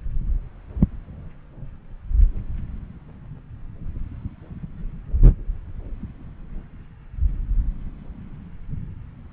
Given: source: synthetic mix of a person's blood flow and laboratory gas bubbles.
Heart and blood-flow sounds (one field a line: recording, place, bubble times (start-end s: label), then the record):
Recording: Doppler ultrasound of blood flow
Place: subclavian vein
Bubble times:
no bubbles
From the record:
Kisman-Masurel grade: 000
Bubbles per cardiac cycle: 0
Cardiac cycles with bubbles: 0%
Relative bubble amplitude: no bubbles discernible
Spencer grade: 0 (complete lack of bubble signals)